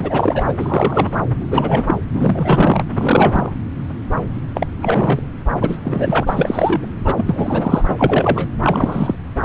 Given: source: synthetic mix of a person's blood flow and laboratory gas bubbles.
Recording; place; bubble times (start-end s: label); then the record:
Doppler ultrasound of blood flow; subclavian vein
0.00-0.53 s: bubbles
0.59-1.18 s: bubbles
1.39-1.95 s: bubbles
2.14-2.84 s: bubbles
2.92-3.52 s: bubbles
4.54-4.67 s: bubbles
4.81-5.22 s: bubbles
5.60-5.77 s: bubbles
5.83-6.86 s: bubbles
7.04-7.84 s: bubbles
7.87-7.96 s: bubbles
7.98-8.47 s: bubbles
8.63-9.15 s: bubbles
From the record:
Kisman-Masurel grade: 333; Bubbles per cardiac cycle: rolling drumbeat, 9 or more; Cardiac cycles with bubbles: 50 to 99%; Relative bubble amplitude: loud (0.450 to 0.775); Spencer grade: 3 (all of the cardiac periods contain showers or single bubble signals, but not dominating or overriding the cardiac motion signals); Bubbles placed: anywhere in the cardiac cycle